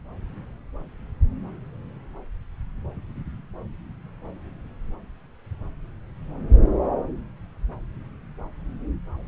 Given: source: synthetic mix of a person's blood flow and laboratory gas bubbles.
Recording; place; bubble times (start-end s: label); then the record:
Doppler ultrasound of blood flow; subclavian vein
no bubbles
From the record:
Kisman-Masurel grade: 000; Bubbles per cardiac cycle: 0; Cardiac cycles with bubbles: 0%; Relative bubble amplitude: no bubbles discernible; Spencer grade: 0 (complete lack of bubble signals)